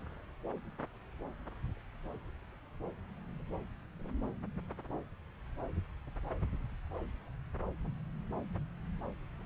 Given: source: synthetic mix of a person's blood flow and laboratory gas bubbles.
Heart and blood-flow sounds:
Doppler ultrasound of blood flow; subclavian vein
no bubbles
From the record:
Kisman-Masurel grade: 000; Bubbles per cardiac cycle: 0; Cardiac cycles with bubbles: 0%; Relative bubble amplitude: no bubbles discernible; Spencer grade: 0 (complete lack of bubble signals)

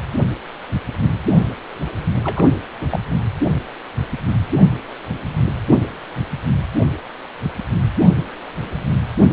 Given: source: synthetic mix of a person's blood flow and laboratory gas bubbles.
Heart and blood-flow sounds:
Doppler ultrasound of blood flow; precordium
2.24-2.53 s: bubbles
2.81-2.86 s: bubbles
2.90-3.00 s: bubbles
From the record:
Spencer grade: 1 (occasional bubble signal discernible with the cardiac motion signal, with majority of cardiac periods free of bubbles); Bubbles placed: anywhere in the cardiac cycle

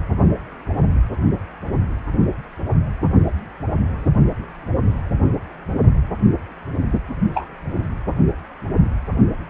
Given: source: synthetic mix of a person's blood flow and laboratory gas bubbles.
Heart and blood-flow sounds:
Doppler ultrasound of blood flow; precordium
7.34-7.47 s: bubbles
From the record:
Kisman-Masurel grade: 112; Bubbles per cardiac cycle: 1 to 2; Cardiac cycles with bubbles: 1 to 10%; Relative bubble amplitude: moderate (0.250 to 0.450); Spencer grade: 1 (occasional bubble signal discernible with the cardiac motion signal, with majority of cardiac periods free of bubbles); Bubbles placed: anywhere in the cardiac cycle

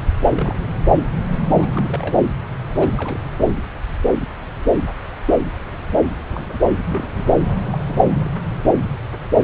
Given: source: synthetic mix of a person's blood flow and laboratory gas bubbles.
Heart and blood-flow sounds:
Doppler ultrasound of blood flow; subclavian vein
0.36-0.70 s: bubbles
1.57-2.16 s: bubbles
2.80-2.88 s: bubbles
2.90-3.19 s: bubbles
6.31-6.58 s: bubbles
6.61-6.65 s: bubbles
6.85-7.08 s: bubbles
7.12-7.35 s: bubbles
7.70-7.78 s: bubbles
7.88-7.97 s: bubbles
8.14-8.29 s: bubbles
From the record:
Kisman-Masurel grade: 221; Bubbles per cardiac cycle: several, 3 to 8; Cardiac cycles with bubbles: 10 to 50%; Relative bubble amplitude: barely perceptible (0.100 to 0.250); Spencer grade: 2 (many but less than half of the cardiac periods contain bubble signals, singularly or in groups); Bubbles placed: anywhere in the cardiac cycle

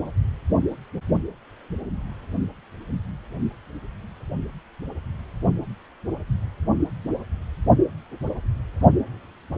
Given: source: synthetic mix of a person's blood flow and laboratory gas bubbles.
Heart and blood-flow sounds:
Doppler ultrasound of blood flow; precordium
no bubbles
From the record:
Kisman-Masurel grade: 000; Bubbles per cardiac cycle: 0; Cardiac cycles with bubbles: 0%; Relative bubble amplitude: no bubbles discernible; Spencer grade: 0 (complete lack of bubble signals)

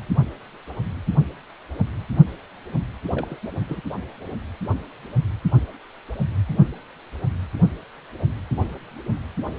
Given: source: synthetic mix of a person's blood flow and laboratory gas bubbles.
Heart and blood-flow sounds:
Doppler ultrasound of blood flow; precordium
3.02-3.39 s: bubbles
3.43-3.48 s: bubbles
3.68-3.81 s: bubbles
From the record:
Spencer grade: 1 (occasional bubble signal discernible with the cardiac motion signal, with majority of cardiac periods free of bubbles); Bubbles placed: anywhere in the cardiac cycle

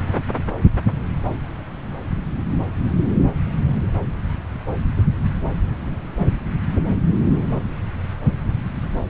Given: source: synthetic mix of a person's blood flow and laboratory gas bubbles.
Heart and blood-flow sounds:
Doppler ultrasound of blood flow; subclavian vein
no bubbles
From the record:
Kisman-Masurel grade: 000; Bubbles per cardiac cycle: 0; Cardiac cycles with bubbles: 0%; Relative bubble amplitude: no bubbles discernible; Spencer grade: 0 (complete lack of bubble signals)

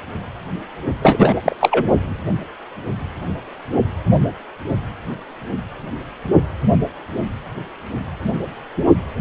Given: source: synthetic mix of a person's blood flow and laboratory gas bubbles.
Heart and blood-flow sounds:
Doppler ultrasound of blood flow; precordium
1.02-1.34 s: bubbles
1.43-1.56 s: bubbles
1.60-1.85 s: bubbles
From the record:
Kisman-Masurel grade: 213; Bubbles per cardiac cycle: several, 3 to 8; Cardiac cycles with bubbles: 1 to 10%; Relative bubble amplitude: loud (0.450 to 0.775); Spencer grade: 1 (occasional bubble signal discernible with the cardiac motion signal, with majority of cardiac periods free of bubbles); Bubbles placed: only in the low amplitude regions of the cardiac cycle

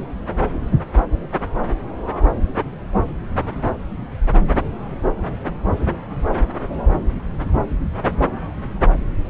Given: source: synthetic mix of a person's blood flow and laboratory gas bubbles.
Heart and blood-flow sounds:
Doppler ultrasound of blood flow; subclavian vein
no bubbles
From the record:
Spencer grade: 0 (complete lack of bubble signals)

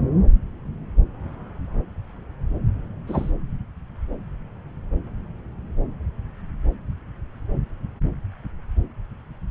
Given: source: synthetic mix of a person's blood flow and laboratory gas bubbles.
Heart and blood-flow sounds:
Doppler ultrasound of blood flow; subclavian vein
3.07-3.31 s: bubbles
From the record:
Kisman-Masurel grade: 112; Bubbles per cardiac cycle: 1 to 2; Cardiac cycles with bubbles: 1 to 10%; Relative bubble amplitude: moderate (0.250 to 0.450); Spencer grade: 1 (occasional bubble signal discernible with the cardiac motion signal, with majority of cardiac periods free of bubbles); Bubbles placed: anywhere in the cardiac cycle

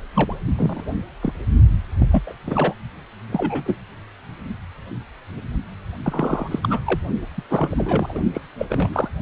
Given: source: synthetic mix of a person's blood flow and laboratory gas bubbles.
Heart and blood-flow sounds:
Doppler ultrasound of blood flow; precordium
0.14-0.35 s: bubbles
0.56-0.84 s: bubbles
1.23-1.33 s: bubbles
1.99-2.08 s: bubbles
2.11-2.22 s: bubbles
2.26-2.33 s: bubbles
2.46-2.74 s: bubbles
3.32-3.77 s: bubbles
6.04-6.59 s: bubbles
6.62-6.80 s: bubbles
6.86-7.00 s: bubbles
7.38-7.42 s: bubbles
7.50-8.21 s: bubbles
8.33-8.41 s: bubbles
8.58-8.65 s: bubbles
8.70-8.89 s: bubbles
8.92-9.08 s: bubbles
From the record:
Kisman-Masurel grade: 232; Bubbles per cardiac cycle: several, 3 to 8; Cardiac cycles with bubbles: 50 to 99%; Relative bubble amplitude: moderate (0.250 to 0.450); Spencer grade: 3 (all of the cardiac periods contain showers or single bubble signals, but not dominating or overriding the cardiac motion signals); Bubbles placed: only in the low amplitude regions of the cardiac cycle

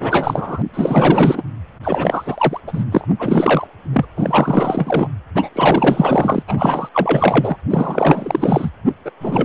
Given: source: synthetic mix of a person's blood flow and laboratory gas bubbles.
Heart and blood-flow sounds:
Doppler ultrasound of blood flow; precordium
0.00-0.62 s: bubbles
0.74-1.43 s: bubbles
1.83-2.60 s: bubbles
2.67-2.85 s: bubbles
2.92-3.07 s: bubbles
3.19-3.68 s: bubbles
3.93-4.05 s: bubbles
4.16-5.09 s: bubbles
5.35-5.49 s: bubbles
5.55-6.43 s: bubbles
6.47-6.89 s: bubbles
6.94-7.57 s: bubbles
7.70-8.70 s: bubbles
8.86-8.93 s: bubbles
9.05-9.11 s: bubbles
9.21-9.45 s: bubbles
From the record:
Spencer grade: 4 (maximum detectable bubble signal sounding continuously throughout systole and diastole of every cardiac period, and overriding the amplitude of the normal cardiac signals); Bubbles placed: anywhere in the cardiac cycle

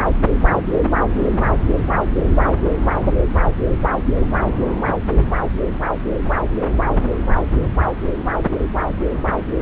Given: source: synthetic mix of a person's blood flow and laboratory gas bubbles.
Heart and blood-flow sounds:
Doppler ultrasound of blood flow; subclavian vein
no bubbles
From the record:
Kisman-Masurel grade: 000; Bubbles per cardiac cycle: 0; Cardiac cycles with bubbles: 0%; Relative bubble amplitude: no bubbles discernible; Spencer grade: 0 (complete lack of bubble signals)

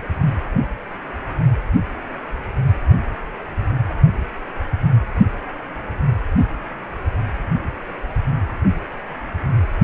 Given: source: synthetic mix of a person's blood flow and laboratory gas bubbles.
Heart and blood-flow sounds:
Doppler ultrasound of blood flow; precordium
no bubbles
From the record:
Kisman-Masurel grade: 000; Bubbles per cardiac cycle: 0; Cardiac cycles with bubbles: 0%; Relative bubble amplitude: no bubbles discernible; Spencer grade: 0 (complete lack of bubble signals)

